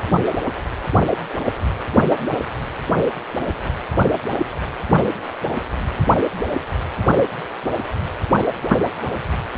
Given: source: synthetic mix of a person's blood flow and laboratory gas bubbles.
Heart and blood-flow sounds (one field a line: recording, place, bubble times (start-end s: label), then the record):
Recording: Doppler ultrasound of blood flow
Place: precordium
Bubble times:
no bubbles
From the record:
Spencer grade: 0 (complete lack of bubble signals)